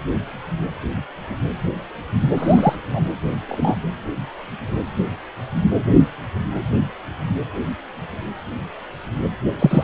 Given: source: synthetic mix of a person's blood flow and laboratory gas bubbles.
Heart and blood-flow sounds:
Doppler ultrasound of blood flow; precordium
2.36-2.76 s: bubbles
2.93-3.02 s: bubbles
3.49-3.76 s: bubbles
9.59-9.84 s: bubbles
From the record:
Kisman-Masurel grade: 123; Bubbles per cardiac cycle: 1 to 2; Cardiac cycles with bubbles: 10 to 50%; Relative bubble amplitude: loud (0.450 to 0.775); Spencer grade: 2 (many but less than half of the cardiac periods contain bubble signals, singularly or in groups); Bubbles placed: anywhere in the cardiac cycle

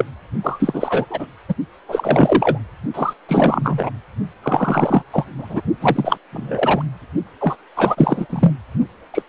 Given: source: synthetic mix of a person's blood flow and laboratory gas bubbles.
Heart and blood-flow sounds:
Doppler ultrasound of blood flow; precordium
0.00-0.03 s: bubbles
0.43-1.05 s: bubbles
1.10-1.26 s: bubbles
1.49-1.54 s: bubbles
1.88-2.59 s: bubbles
2.94-3.13 s: bubbles
3.28-3.90 s: bubbles
4.42-5.02 s: bubbles
5.12-5.25 s: bubbles
5.38-5.62 s: bubbles
5.80-6.17 s: bubbles
6.32-6.83 s: bubbles
7.40-7.57 s: bubbles
7.76-8.26 s: bubbles
8.29-8.52 s: bubbles
9.13-9.22 s: bubbles
From the record:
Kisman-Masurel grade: 343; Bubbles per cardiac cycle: rolling drumbeat, 9 or more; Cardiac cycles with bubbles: 100%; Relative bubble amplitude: loud (0.450 to 0.775); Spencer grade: 3 (all of the cardiac periods contain showers or single bubble signals, but not dominating or overriding the cardiac motion signals); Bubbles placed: only in the low amplitude regions of the cardiac cycle

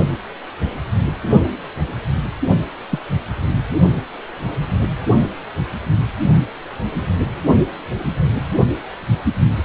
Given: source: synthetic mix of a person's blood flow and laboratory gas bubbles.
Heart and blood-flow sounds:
Doppler ultrasound of blood flow; precordium
2.91-3.00 s: bubbles
From the record:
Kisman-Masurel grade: 112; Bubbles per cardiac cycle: 1 to 2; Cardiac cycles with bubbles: 1 to 10%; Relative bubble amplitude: moderate (0.250 to 0.450); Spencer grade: 1 (occasional bubble signal discernible with the cardiac motion signal, with majority of cardiac periods free of bubbles); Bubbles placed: only in the low amplitude regions of the cardiac cycle

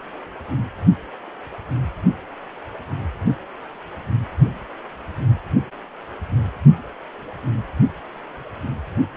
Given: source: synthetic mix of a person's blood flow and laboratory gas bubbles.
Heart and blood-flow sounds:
Doppler ultrasound of blood flow; precordium
no bubbles
From the record:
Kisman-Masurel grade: 000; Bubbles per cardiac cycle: 0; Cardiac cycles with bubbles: 0%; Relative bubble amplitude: no bubbles discernible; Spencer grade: 0 (complete lack of bubble signals)

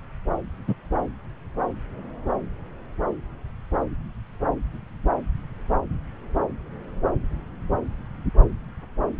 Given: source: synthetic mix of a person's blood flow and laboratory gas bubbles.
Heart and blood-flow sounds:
Doppler ultrasound of blood flow; subclavian vein
0.67-0.75 s: bubbles
From the record:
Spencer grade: 1 (occasional bubble signal discernible with the cardiac motion signal, with majority of cardiac periods free of bubbles); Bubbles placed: anywhere in the cardiac cycle

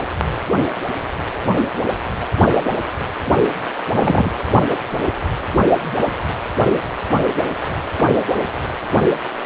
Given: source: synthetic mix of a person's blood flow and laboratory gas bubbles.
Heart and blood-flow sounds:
Doppler ultrasound of blood flow; precordium
3.92-4.31 s: bubbles
From the record:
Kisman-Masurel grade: 113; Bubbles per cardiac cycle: 1 to 2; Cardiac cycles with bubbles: 1 to 10%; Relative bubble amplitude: loud (0.450 to 0.775); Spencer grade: 1 (occasional bubble signal discernible with the cardiac motion signal, with majority of cardiac periods free of bubbles); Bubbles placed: anywhere in the cardiac cycle

